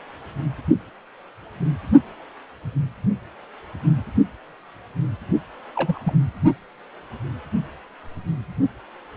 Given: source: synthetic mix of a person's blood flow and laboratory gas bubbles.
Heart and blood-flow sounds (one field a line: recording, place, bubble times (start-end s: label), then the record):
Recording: Doppler ultrasound of blood flow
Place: precordium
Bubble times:
5.75-6.12 s: bubbles
From the record:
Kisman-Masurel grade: 212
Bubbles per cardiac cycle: several, 3 to 8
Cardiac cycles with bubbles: 1 to 10%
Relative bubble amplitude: moderate (0.250 to 0.450)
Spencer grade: 1 (occasional bubble signal discernible with the cardiac motion signal, with majority of cardiac periods free of bubbles)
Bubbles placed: only in the low amplitude regions of the cardiac cycle